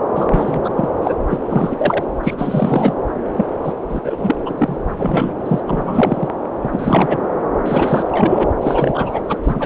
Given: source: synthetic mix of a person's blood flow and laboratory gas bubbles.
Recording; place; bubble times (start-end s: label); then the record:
Doppler ultrasound of blood flow; subclavian vein
0.15-0.60 s: bubbles
0.64-0.70 s: bubbles
0.76-0.89 s: bubbles
1.02-1.15 s: bubbles
1.30-1.38 s: bubbles
1.49-2.07 s: bubbles
2.23-2.34 s: bubbles
2.38-2.94 s: bubbles
3.36-3.46 s: bubbles
3.64-3.74 s: bubbles
3.88-4.01 s: bubbles
4.04-4.36 s: bubbles
4.46-4.54 s: bubbles
4.58-4.76 s: bubbles
4.87-4.91 s: bubbles
4.98-5.36 s: bubbles
5.46-5.61 s: bubbles
5.67-6.29 s: bubbles
6.63-6.70 s: bubbles
6.72-7.17 s: bubbles
7.66-8.47 s: bubbles
8.62-9.21 s: bubbles
9.29-9.38 s: bubbles
9.43-9.66 s: bubbles
From the record:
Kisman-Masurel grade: 343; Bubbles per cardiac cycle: rolling drumbeat, 9 or more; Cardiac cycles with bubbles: 100%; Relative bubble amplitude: loud (0.450 to 0.775); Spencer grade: 3 (all of the cardiac periods contain showers or single bubble signals, but not dominating or overriding the cardiac motion signals); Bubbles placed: anywhere in the cardiac cycle